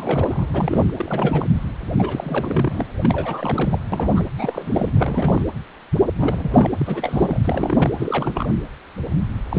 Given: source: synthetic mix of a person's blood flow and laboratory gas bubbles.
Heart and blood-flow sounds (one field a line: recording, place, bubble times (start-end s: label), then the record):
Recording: Doppler ultrasound of blood flow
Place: precordium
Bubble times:
0.00-0.48 s: bubbles
0.53-0.91 s: bubbles
0.96-1.47 s: bubbles
1.98-2.86 s: bubbles
3.02-3.79 s: bubbles
3.92-4.23 s: bubbles
4.37-4.92 s: bubbles
4.95-5.42 s: bubbles
6.18-6.70 s: bubbles
6.79-7.41 s: bubbles
7.44-7.91 s: bubbles
7.97-8.49 s: bubbles
9.50-9.59 s: bubbles
From the record:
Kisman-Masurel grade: 332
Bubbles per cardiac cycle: rolling drumbeat, 9 or more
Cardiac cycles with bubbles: 50 to 99%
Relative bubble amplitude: moderate (0.250 to 0.450)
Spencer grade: 3 (all of the cardiac periods contain showers or single bubble signals, but not dominating or overriding the cardiac motion signals)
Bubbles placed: anywhere in the cardiac cycle